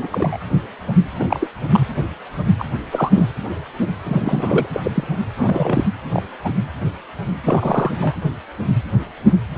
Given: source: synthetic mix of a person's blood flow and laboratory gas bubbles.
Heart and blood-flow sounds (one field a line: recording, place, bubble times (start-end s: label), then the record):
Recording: Doppler ultrasound of blood flow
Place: precordium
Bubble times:
0.00-0.08 s: bubbles
0.11-0.37 s: bubbles
1.19-1.25 s: bubbles
1.29-1.48 s: bubbles
1.68-1.86 s: bubbles
2.58-2.65 s: bubbles
2.92-3.11 s: bubbles
3.14-3.27 s: bubbles
4.04-4.67 s: bubbles
4.72-4.80 s: bubbles
4.83-4.91 s: bubbles
4.95-5.04 s: bubbles
5.37-5.87 s: bubbles
6.13-6.22 s: bubbles
6.44-6.50 s: bubbles
7.43-7.91 s: bubbles
8.00-8.14 s: bubbles
From the record:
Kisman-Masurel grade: 232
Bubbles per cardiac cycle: several, 3 to 8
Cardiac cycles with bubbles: 50 to 99%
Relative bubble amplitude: moderate (0.250 to 0.450)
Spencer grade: 3 (all of the cardiac periods contain showers or single bubble signals, but not dominating or overriding the cardiac motion signals)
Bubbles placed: anywhere in the cardiac cycle